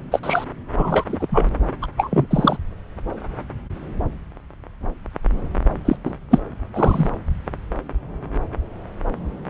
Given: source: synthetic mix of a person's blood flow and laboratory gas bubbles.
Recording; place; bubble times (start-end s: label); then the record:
Doppler ultrasound of blood flow; subclavian vein
0.11-0.20 s: bubbles
0.23-0.45 s: bubbles
0.77-1.04 s: bubbles
1.08-1.27 s: bubbles
1.30-1.49 s: bubbles
1.81-1.87 s: bubbles
1.96-2.25 s: bubbles
2.30-2.57 s: bubbles
5.85-5.96 s: bubbles
6.04-6.14 s: bubbles
6.30-6.39 s: bubbles
6.74-7.10 s: bubbles
From the record:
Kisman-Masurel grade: 223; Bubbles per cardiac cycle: several, 3 to 8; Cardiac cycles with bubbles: 10 to 50%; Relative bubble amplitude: loud (0.450 to 0.775); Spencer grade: 2 (many but less than half of the cardiac periods contain bubble signals, singularly or in groups); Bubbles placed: anywhere in the cardiac cycle